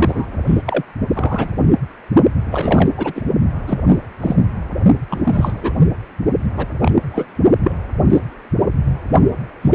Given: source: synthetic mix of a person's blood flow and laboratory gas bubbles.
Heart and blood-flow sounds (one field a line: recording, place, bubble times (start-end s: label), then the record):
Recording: Doppler ultrasound of blood flow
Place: precordium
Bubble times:
0.00-0.38 s: bubbles
0.46-0.62 s: bubbles
0.66-0.83 s: bubbles
1.14-1.58 s: bubbles
2.50-2.90 s: bubbles
2.97-3.12 s: bubbles
3.15-3.23 s: bubbles
3.67-3.80 s: bubbles
3.88-3.97 s: bubbles
4.21-4.36 s: bubbles
5.09-5.72 s: bubbles
6.56-6.66 s: bubbles
6.79-6.96 s: bubbles
7.10-7.25 s: bubbles
7.63-7.72 s: bubbles
8.09-8.21 s: bubbles
8.86-8.98 s: bubbles
9.61-9.75 s: bubbles
From the record:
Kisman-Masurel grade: 243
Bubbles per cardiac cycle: several, 3 to 8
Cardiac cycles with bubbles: 100%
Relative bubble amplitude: loud (0.450 to 0.775)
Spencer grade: 3 (all of the cardiac periods contain showers or single bubble signals, but not dominating or overriding the cardiac motion signals)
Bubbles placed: only in the low amplitude regions of the cardiac cycle